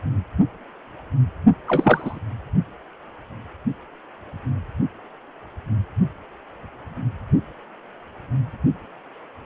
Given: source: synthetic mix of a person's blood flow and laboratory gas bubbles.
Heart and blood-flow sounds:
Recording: Doppler ultrasound of blood flow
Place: precordium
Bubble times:
1.67-2.20 s: bubbles
From the record:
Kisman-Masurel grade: 212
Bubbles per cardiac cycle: several, 3 to 8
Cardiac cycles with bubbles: 1 to 10%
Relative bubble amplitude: moderate (0.250 to 0.450)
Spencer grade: 1 (occasional bubble signal discernible with the cardiac motion signal, with majority of cardiac periods free of bubbles)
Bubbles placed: only in the low amplitude regions of the cardiac cycle

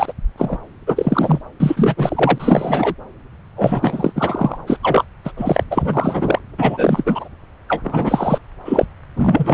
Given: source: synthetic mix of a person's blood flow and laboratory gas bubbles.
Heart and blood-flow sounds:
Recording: Doppler ultrasound of blood flow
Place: subclavian vein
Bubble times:
0.00-0.13 s: bubbles
0.38-0.58 s: bubbles
0.86-1.41 s: bubbles
1.60-2.95 s: bubbles
3.56-4.12 s: bubbles
4.15-4.58 s: bubbles
4.67-4.77 s: bubbles
4.82-5.04 s: bubbles
5.25-5.31 s: bubbles
5.36-5.63 s: bubbles
5.71-6.39 s: bubbles
6.58-7.28 s: bubbles
7.68-8.39 s: bubbles
8.65-8.86 s: bubbles
9.16-9.54 s: bubbles
From the record:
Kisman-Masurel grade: 343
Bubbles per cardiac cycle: rolling drumbeat, 9 or more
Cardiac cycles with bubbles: 100%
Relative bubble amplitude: loud (0.450 to 0.775)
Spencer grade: 3 (all of the cardiac periods contain showers or single bubble signals, but not dominating or overriding the cardiac motion signals)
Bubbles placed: anywhere in the cardiac cycle

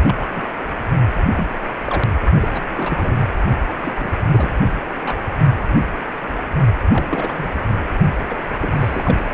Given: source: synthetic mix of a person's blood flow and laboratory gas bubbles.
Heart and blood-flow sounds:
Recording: Doppler ultrasound of blood flow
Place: precordium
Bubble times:
0.07-0.14 s: bubbles
0.20-0.29 s: bubbles
0.35-0.43 s: bubbles
1.36-1.48 s: bubbles
1.84-2.04 s: bubbles
2.40-2.48 s: bubbles
2.52-2.62 s: bubbles
2.77-3.18 s: bubbles
3.80-4.14 s: bubbles
4.32-4.50 s: bubbles
5.04-5.21 s: bubbles
6.89-7.50 s: bubbles
8.28-8.39 s: bubbles
8.58-9.23 s: bubbles
From the record:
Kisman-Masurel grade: 232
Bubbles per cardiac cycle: several, 3 to 8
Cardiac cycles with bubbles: 50 to 99%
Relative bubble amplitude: moderate (0.250 to 0.450)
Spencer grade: 3 (all of the cardiac periods contain showers or single bubble signals, but not dominating or overriding the cardiac motion signals)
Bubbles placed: only in the low amplitude regions of the cardiac cycle

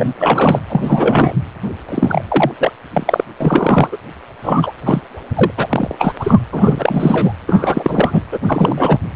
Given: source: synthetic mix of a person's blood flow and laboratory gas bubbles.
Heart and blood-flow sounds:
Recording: Doppler ultrasound of blood flow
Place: precordium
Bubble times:
0.00-0.14 s: bubbles
0.19-0.61 s: bubbles
0.68-1.35 s: bubbles
1.88-2.23 s: bubbles
2.28-2.51 s: bubbles
2.58-2.72 s: bubbles
2.92-3.24 s: bubbles
3.40-3.97 s: bubbles
4.43-4.71 s: bubbles
4.85-5.01 s: bubbles
5.35-5.50 s: bubbles
5.57-5.95 s: bubbles
5.99-6.15 s: bubbles
6.20-6.38 s: bubbles
6.52-7.33 s: bubbles
7.47-8.22 s: bubbles
8.32-8.39 s: bubbles
8.47-8.98 s: bubbles
From the record:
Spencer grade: 3 (all of the cardiac periods contain showers or single bubble signals, but not dominating or overriding the cardiac motion signals)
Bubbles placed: anywhere in the cardiac cycle

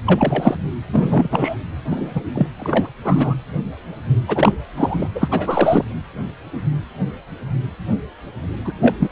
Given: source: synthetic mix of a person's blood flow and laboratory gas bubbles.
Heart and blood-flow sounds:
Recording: Doppler ultrasound of blood flow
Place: precordium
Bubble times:
0.06-0.57 s: bubbles
0.93-1.28 s: bubbles
1.31-1.57 s: bubbles
1.90-2.24 s: bubbles
2.35-2.47 s: bubbles
2.59-2.89 s: bubbles
3.04-3.34 s: bubbles
4.28-4.56 s: bubbles
4.77-5.08 s: bubbles
5.15-5.28 s: bubbles
5.31-5.85 s: bubbles
8.64-8.72 s: bubbles
8.81-8.96 s: bubbles
8.99-9.09 s: bubbles
From the record:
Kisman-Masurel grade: 233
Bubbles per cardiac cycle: several, 3 to 8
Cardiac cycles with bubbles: 50 to 99%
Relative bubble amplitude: loud (0.450 to 0.775)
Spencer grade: 3 (all of the cardiac periods contain showers or single bubble signals, but not dominating or overriding the cardiac motion signals)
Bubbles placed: anywhere in the cardiac cycle

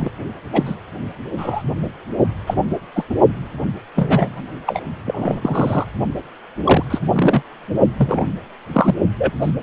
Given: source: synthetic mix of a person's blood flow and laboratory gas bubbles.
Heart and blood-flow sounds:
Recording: Doppler ultrasound of blood flow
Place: precordium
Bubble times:
0.00-0.11 s: bubbles
0.53-0.76 s: bubbles
1.38-1.62 s: bubbles
2.46-2.54 s: bubbles
2.94-3.04 s: bubbles
3.10-3.15 s: bubbles
3.96-4.48 s: bubbles
4.66-4.81 s: bubbles
5.05-5.85 s: bubbles
6.64-6.83 s: bubbles
6.90-6.99 s: bubbles
7.09-7.42 s: bubbles
7.97-8.37 s: bubbles
8.72-8.94 s: bubbles
9.17-9.33 s: bubbles
9.40-9.51 s: bubbles
From the record:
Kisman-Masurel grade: 233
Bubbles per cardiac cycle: several, 3 to 8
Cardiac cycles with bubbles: 50 to 99%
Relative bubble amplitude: loud (0.450 to 0.775)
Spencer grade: 3 (all of the cardiac periods contain showers or single bubble signals, but not dominating or overriding the cardiac motion signals)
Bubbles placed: only in the low amplitude regions of the cardiac cycle

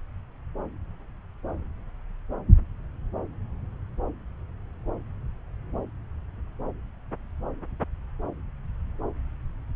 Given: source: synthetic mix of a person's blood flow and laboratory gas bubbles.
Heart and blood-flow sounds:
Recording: Doppler ultrasound of blood flow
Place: subclavian vein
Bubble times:
no bubbles
From the record:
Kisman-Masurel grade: 000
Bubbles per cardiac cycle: 0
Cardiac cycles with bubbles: 0%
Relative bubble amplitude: no bubbles discernible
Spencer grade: 0 (complete lack of bubble signals)

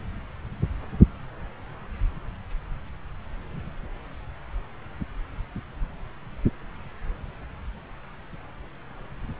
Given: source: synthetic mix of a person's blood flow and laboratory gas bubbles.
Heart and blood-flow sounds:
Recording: Doppler ultrasound of blood flow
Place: subclavian vein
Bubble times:
no bubbles
From the record:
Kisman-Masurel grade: 000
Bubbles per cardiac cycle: 0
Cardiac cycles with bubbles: 0%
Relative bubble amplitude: no bubbles discernible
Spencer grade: 0 (complete lack of bubble signals)

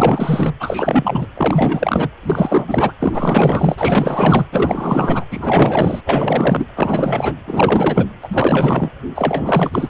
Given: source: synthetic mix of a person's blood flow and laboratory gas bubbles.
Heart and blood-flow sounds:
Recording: Doppler ultrasound of blood flow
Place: precordium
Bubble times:
0.00-0.54 s: bubbles
0.59-1.27 s: bubbles
1.37-2.08 s: bubbles
2.23-2.65 s: bubbles
2.67-2.92 s: bubbles
3.00-4.46 s: bubbles
4.52-5.25 s: bubbles
5.30-6.01 s: bubbles
6.05-6.66 s: bubbles
6.75-7.35 s: bubbles
7.47-8.09 s: bubbles
8.22-8.90 s: bubbles
9.15-9.90 s: bubbles
From the record:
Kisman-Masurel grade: 444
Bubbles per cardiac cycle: continuous sound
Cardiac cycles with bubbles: 100%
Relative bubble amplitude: maximal (0.775 to 0.999)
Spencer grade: 4 (maximum detectable bubble signal sounding continuously throughout systole and diastole of every cardiac period, and overriding the amplitude of the normal cardiac signals)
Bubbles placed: anywhere in the cardiac cycle

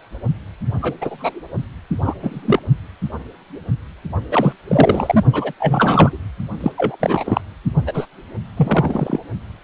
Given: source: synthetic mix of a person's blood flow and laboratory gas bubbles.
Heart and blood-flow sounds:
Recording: Doppler ultrasound of blood flow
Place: precordium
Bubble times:
0.81-0.94 s: bubbles
1.01-1.41 s: bubbles
2.04-2.14 s: bubbles
2.21-2.41 s: bubbles
2.44-2.59 s: bubbles
4.31-4.53 s: bubbles
4.68-5.24 s: bubbles
5.32-5.52 s: bubbles
5.60-6.18 s: bubbles
6.61-6.71 s: bubbles
6.78-6.96 s: bubbles
7.00-7.41 s: bubbles
7.86-8.05 s: bubbles
8.56-9.18 s: bubbles
From the record:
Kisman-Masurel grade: 233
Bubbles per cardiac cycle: several, 3 to 8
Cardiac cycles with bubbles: 50 to 99%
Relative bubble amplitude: loud (0.450 to 0.775)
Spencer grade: 3 (all of the cardiac periods contain showers or single bubble signals, but not dominating or overriding the cardiac motion signals)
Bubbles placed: only in the low amplitude regions of the cardiac cycle

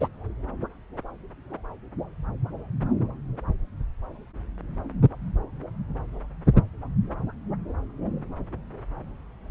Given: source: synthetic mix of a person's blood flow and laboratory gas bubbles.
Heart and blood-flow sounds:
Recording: Doppler ultrasound of blood flow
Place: subclavian vein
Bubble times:
0.01-0.08 s: bubbles
From the record:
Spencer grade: 1 (occasional bubble signal discernible with the cardiac motion signal, with majority of cardiac periods free of bubbles)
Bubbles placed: anywhere in the cardiac cycle

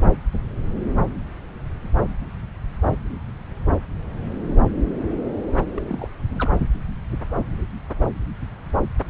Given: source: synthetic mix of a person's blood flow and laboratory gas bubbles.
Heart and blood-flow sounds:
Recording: Doppler ultrasound of blood flow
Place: subclavian vein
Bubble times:
5.75-5.81 s: bubbles
5.88-6.09 s: bubbles
6.29-6.49 s: bubbles
From the record:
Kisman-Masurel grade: 221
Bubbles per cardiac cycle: several, 3 to 8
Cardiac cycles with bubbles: 10 to 50%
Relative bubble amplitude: barely perceptible (0.100 to 0.250)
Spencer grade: 2 (many but less than half of the cardiac periods contain bubble signals, singularly or in groups)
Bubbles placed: anywhere in the cardiac cycle

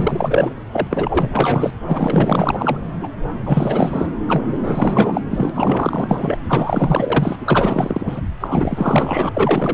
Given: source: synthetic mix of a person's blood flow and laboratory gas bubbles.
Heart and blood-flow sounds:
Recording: Doppler ultrasound of blood flow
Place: subclavian vein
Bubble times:
0.00-0.53 s: bubbles
0.72-0.88 s: bubbles
0.90-1.74 s: bubbles
1.86-2.78 s: bubbles
3.01-3.08 s: bubbles
3.44-4.06 s: bubbles
4.27-4.44 s: bubbles
4.51-5.21 s: bubbles
5.30-5.50 s: bubbles
5.54-6.38 s: bubbles
6.47-7.36 s: bubbles
7.41-8.21 s: bubbles
8.40-9.29 s: bubbles
9.34-9.74 s: bubbles
From the record:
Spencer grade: 4 (maximum detectable bubble signal sounding continuously throughout systole and diastole of every cardiac period, and overriding the amplitude of the normal cardiac signals)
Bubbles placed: anywhere in the cardiac cycle

